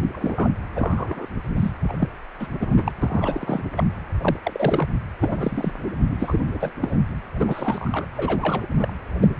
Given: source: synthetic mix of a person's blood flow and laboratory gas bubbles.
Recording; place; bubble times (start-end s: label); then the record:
Doppler ultrasound of blood flow; precordium
0.12-0.50 s: bubbles
0.76-1.27 s: bubbles
1.56-1.71 s: bubbles
1.88-1.94 s: bubbles
2.00-2.09 s: bubbles
2.39-2.48 s: bubbles
2.60-2.70 s: bubbles
2.76-2.92 s: bubbles
3.02-3.63 s: bubbles
3.76-3.84 s: bubbles
4.21-4.37 s: bubbles
4.43-4.88 s: bubbles
5.20-5.72 s: bubbles
6.00-6.16 s: bubbles
6.19-6.39 s: bubbles
6.60-6.73 s: bubbles
6.81-6.96 s: bubbles
7.39-8.07 s: bubbles
8.17-8.66 s: bubbles
8.78-8.93 s: bubbles
9.20-9.28 s: bubbles
From the record:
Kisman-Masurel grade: 232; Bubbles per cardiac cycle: several, 3 to 8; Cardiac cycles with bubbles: 50 to 99%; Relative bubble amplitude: moderate (0.250 to 0.450); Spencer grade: 3 (all of the cardiac periods contain showers or single bubble signals, but not dominating or overriding the cardiac motion signals); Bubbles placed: anywhere in the cardiac cycle